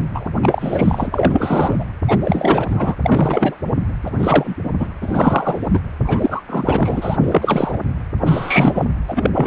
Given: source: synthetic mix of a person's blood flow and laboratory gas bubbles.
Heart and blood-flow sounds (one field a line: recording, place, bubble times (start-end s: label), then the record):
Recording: Doppler ultrasound of blood flow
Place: precordium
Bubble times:
0.14-0.28 s: bubbles
0.42-1.84 s: bubbles
2.07-2.19 s: bubbles
2.23-2.95 s: bubbles
3.02-3.56 s: bubbles
4.05-4.11 s: bubbles
4.18-4.55 s: bubbles
4.63-4.70 s: bubbles
4.79-4.88 s: bubbles
5.02-5.80 s: bubbles
6.04-6.42 s: bubbles
6.49-7.17 s: bubbles
7.21-7.79 s: bubbles
8.26-8.86 s: bubbles
9.08-9.30 s: bubbles
9.34-9.47 s: bubbles
From the record:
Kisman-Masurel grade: 343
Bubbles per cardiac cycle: rolling drumbeat, 9 or more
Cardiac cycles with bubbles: 100%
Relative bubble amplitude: loud (0.450 to 0.775)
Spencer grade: 3 (all of the cardiac periods contain showers or single bubble signals, but not dominating or overriding the cardiac motion signals)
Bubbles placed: anywhere in the cardiac cycle